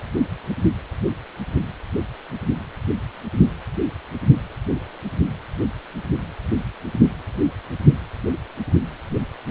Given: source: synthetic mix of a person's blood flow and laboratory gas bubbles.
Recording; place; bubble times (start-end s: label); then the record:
Doppler ultrasound of blood flow; precordium
no bubbles
From the record:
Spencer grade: 0 (complete lack of bubble signals)